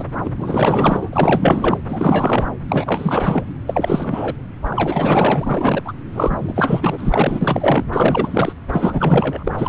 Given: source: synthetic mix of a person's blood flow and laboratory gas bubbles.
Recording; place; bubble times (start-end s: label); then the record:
Doppler ultrasound of blood flow; subclavian vein
0.00-0.10 s: bubbles
0.24-0.30 s: bubbles
0.38-1.09 s: bubbles
1.12-1.79 s: bubbles
1.88-2.47 s: bubbles
2.68-3.44 s: bubbles
3.67-4.34 s: bubbles
4.70-5.93 s: bubbles
6.12-7.84 s: bubbles
7.92-8.54 s: bubbles
8.72-9.51 s: bubbles
9.57-9.69 s: bubbles
From the record:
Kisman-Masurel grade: 444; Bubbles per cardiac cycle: continuous sound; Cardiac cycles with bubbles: 100%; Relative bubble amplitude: maximal (0.775 to 0.999); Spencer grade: 4 (maximum detectable bubble signal sounding continuously throughout systole and diastole of every cardiac period, and overriding the amplitude of the normal cardiac signals); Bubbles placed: anywhere in the cardiac cycle